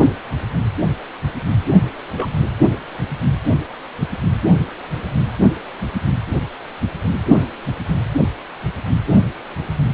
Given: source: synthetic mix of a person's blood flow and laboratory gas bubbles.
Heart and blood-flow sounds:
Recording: Doppler ultrasound of blood flow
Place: precordium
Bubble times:
2.17-2.27 s: bubbles
From the record:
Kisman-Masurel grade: 122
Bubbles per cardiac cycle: 1 to 2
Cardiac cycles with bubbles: 10 to 50%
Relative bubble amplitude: moderate (0.250 to 0.450)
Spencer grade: 2 (many but less than half of the cardiac periods contain bubble signals, singularly or in groups)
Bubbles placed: only in the low amplitude regions of the cardiac cycle

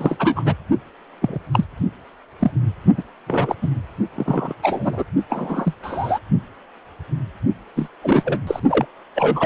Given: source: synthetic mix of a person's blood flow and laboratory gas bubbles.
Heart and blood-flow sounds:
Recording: Doppler ultrasound of blood flow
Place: precordium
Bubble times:
0.00-0.55 s: bubbles
1.21-1.40 s: bubbles
1.52-1.65 s: bubbles
2.39-2.51 s: bubbles
2.97-3.02 s: bubbles
3.27-3.55 s: bubbles
3.62-3.68 s: bubbles
4.16-4.54 s: bubbles
4.62-5.04 s: bubbles
5.29-5.75 s: bubbles
5.83-6.19 s: bubbles
7.76-7.88 s: bubbles
8.03-8.40 s: bubbles
8.47-8.60 s: bubbles
8.70-8.86 s: bubbles
9.15-9.46 s: bubbles
From the record:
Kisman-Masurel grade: 232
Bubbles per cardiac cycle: several, 3 to 8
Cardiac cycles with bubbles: 50 to 99%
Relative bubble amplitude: moderate (0.250 to 0.450)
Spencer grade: 3 (all of the cardiac periods contain showers or single bubble signals, but not dominating or overriding the cardiac motion signals)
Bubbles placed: only in the low amplitude regions of the cardiac cycle

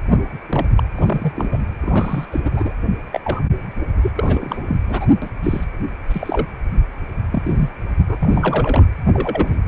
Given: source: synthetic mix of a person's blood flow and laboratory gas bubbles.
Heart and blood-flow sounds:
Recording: Doppler ultrasound of blood flow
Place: precordium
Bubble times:
0.10-0.20 s: bubbles
0.49-0.67 s: bubbles
0.76-0.83 s: bubbles
0.95-1.60 s: bubbles
1.82-2.25 s: bubbles
2.31-2.40 s: bubbles
2.45-2.73 s: bubbles
3.12-3.20 s: bubbles
3.24-3.42 s: bubbles
4.01-4.11 s: bubbles
4.15-4.76 s: bubbles
4.88-5.06 s: bubbles
5.22-5.30 s: bubbles
5.43-5.64 s: bubbles
6.12-6.46 s: bubbles
7.32-7.69 s: bubbles
8.07-8.15 s: bubbles
8.20-8.87 s: bubbles
9.13-9.59 s: bubbles
From the record:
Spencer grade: 3 (all of the cardiac periods contain showers or single bubble signals, but not dominating or overriding the cardiac motion signals)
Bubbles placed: anywhere in the cardiac cycle

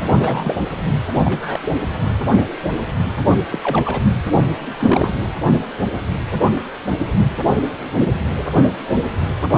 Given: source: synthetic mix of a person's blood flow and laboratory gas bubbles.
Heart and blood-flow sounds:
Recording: Doppler ultrasound of blood flow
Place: precordium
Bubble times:
0.14-0.58 s: bubbles
1.23-1.60 s: bubbles
1.65-1.73 s: bubbles
3.38-3.44 s: bubbles
3.50-4.01 s: bubbles
4.78-5.26 s: bubbles
From the record:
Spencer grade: 2 (many but less than half of the cardiac periods contain bubble signals, singularly or in groups)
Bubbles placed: anywhere in the cardiac cycle

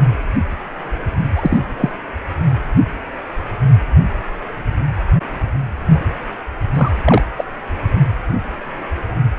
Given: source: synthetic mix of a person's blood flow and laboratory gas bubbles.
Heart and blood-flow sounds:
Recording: Doppler ultrasound of blood flow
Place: precordium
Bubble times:
1.35-1.57 s: bubbles
1.78-1.91 s: bubbles
5.89-6.00 s: bubbles
6.75-6.92 s: bubbles
7.04-7.23 s: bubbles
7.37-7.45 s: bubbles
From the record:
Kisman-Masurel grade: 123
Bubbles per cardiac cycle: 1 to 2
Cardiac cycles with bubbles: 10 to 50%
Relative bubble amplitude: loud (0.450 to 0.775)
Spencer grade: 2 (many but less than half of the cardiac periods contain bubble signals, singularly or in groups)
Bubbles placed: anywhere in the cardiac cycle

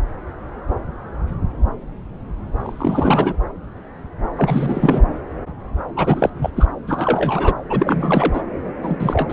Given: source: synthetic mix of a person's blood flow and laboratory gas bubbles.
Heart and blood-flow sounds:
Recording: Doppler ultrasound of blood flow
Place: subclavian vein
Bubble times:
2.59-3.36 s: bubbles
4.36-5.02 s: bubbles
5.96-6.30 s: bubbles
6.42-6.50 s: bubbles
6.56-6.66 s: bubbles
6.87-7.54 s: bubbles
7.70-8.41 s: bubbles
8.82-9.33 s: bubbles
From the record:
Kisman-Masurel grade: 333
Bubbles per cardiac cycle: rolling drumbeat, 9 or more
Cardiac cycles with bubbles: 50 to 99%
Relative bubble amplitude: loud (0.450 to 0.775)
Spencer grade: 3 (all of the cardiac periods contain showers or single bubble signals, but not dominating or overriding the cardiac motion signals)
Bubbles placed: anywhere in the cardiac cycle

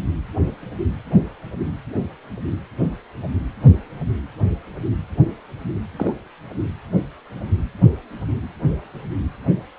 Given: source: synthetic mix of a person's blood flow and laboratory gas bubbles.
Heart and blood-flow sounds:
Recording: Doppler ultrasound of blood flow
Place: precordium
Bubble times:
5.96-6.13 s: bubbles
From the record:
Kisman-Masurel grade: 112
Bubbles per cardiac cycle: 1 to 2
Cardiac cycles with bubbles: 1 to 10%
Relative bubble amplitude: moderate (0.250 to 0.450)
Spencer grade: 1 (occasional bubble signal discernible with the cardiac motion signal, with majority of cardiac periods free of bubbles)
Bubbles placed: anywhere in the cardiac cycle

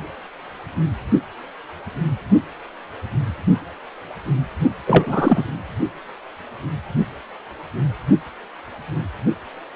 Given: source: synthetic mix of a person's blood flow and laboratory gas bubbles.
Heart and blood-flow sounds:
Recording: Doppler ultrasound of blood flow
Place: precordium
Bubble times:
4.86-5.43 s: bubbles
From the record:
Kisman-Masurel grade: 223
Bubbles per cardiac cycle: several, 3 to 8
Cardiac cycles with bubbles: 10 to 50%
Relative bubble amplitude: loud (0.450 to 0.775)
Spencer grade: 2 (many but less than half of the cardiac periods contain bubble signals, singularly or in groups)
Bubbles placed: anywhere in the cardiac cycle

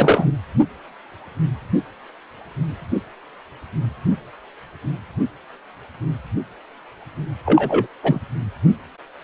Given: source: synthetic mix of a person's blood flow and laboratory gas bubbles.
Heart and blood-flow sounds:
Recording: Doppler ultrasound of blood flow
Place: precordium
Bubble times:
0.00-0.26 s: bubbles
7.46-7.87 s: bubbles
8.03-8.21 s: bubbles
From the record:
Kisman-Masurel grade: 223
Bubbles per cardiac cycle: several, 3 to 8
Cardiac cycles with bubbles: 10 to 50%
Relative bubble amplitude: loud (0.450 to 0.775)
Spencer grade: 2 (many but less than half of the cardiac periods contain bubble signals, singularly or in groups)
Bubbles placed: anywhere in the cardiac cycle

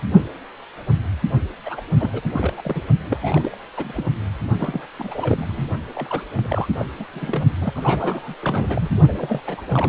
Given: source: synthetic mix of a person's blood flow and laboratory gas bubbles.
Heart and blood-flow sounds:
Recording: Doppler ultrasound of blood flow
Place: precordium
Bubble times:
1.66-1.82 s: bubbles
1.99-2.54 s: bubbles
2.57-2.83 s: bubbles
3.09-3.58 s: bubbles
3.77-4.06 s: bubbles
4.58-4.86 s: bubbles
4.99-5.68 s: bubbles
5.94-6.24 s: bubbles
6.37-6.69 s: bubbles
6.78-6.86 s: bubbles
7.00-7.05 s: bubbles
7.12-7.44 s: bubbles
7.61-8.35 s: bubbles
8.42-9.02 s: bubbles
9.08-9.41 s: bubbles
9.46-9.62 s: bubbles
9.66-9.89 s: bubbles
From the record:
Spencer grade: 3 (all of the cardiac periods contain showers or single bubble signals, but not dominating or overriding the cardiac motion signals)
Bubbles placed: only in the low amplitude regions of the cardiac cycle

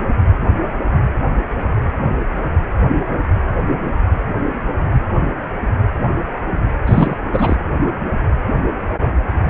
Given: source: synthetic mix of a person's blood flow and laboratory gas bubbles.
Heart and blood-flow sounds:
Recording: Doppler ultrasound of blood flow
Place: precordium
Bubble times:
6.86-7.17 s: bubbles
7.32-7.56 s: bubbles
9.45-9.50 s: bubbles
From the record:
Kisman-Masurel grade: 213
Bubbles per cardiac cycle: several, 3 to 8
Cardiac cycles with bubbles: 1 to 10%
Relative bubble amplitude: loud (0.450 to 0.775)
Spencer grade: 1 (occasional bubble signal discernible with the cardiac motion signal, with majority of cardiac periods free of bubbles)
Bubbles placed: anywhere in the cardiac cycle

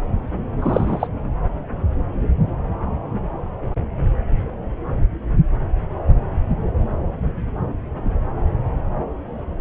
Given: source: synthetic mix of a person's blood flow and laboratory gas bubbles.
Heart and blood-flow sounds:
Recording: Doppler ultrasound of blood flow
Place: subclavian vein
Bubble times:
0.61-1.07 s: bubbles
From the record:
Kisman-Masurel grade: 213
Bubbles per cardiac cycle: several, 3 to 8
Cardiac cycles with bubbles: 1 to 10%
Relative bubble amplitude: loud (0.450 to 0.775)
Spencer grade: 1 (occasional bubble signal discernible with the cardiac motion signal, with majority of cardiac periods free of bubbles)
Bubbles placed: anywhere in the cardiac cycle

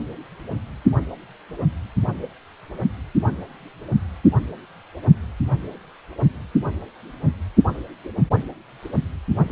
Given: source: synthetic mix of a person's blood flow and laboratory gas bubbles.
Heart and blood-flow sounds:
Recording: Doppler ultrasound of blood flow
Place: precordium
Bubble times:
no bubbles
From the record:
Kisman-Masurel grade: 000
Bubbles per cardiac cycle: 0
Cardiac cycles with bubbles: 0%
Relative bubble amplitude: no bubbles discernible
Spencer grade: 0 (complete lack of bubble signals)

